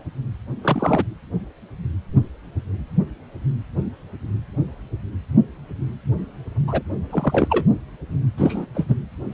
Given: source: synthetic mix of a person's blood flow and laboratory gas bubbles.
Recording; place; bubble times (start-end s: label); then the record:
Doppler ultrasound of blood flow; precordium
0.61-1.05 s: bubbles
6.67-6.82 s: bubbles
7.11-7.65 s: bubbles
8.37-8.66 s: bubbles
8.75-8.86 s: bubbles
8.88-8.96 s: bubbles
From the record:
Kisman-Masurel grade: 223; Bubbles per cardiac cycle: several, 3 to 8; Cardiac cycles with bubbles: 10 to 50%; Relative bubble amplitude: loud (0.450 to 0.775); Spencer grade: 2 (many but less than half of the cardiac periods contain bubble signals, singularly or in groups); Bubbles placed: anywhere in the cardiac cycle